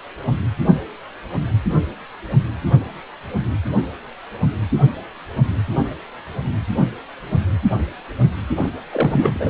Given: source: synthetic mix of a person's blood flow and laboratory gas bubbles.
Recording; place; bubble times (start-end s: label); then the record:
Doppler ultrasound of blood flow; precordium
8.55-8.69 s: bubbles
8.91-9.49 s: bubbles
From the record:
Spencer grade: 2 (many but less than half of the cardiac periods contain bubble signals, singularly or in groups); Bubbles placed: only in the low amplitude regions of the cardiac cycle